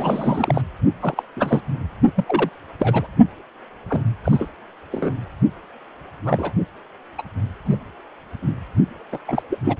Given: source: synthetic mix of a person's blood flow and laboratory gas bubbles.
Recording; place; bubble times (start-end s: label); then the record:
Doppler ultrasound of blood flow; precordium
0.00-0.61 s: bubbles
1.01-1.23 s: bubbles
1.36-1.61 s: bubbles
2.16-2.24 s: bubbles
2.27-2.49 s: bubbles
2.79-3.07 s: bubbles
3.90-4.03 s: bubbles
4.24-4.49 s: bubbles
4.92-5.12 s: bubbles
6.25-6.52 s: bubbles
7.18-7.23 s: bubbles
7.65-7.75 s: bubbles
8.42-8.53 s: bubbles
9.12-9.18 s: bubbles
9.28-9.43 s: bubbles
9.50-9.59 s: bubbles
9.64-9.77 s: bubbles
From the record:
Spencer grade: 3 (all of the cardiac periods contain showers or single bubble signals, but not dominating or overriding the cardiac motion signals); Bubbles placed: only in the low amplitude regions of the cardiac cycle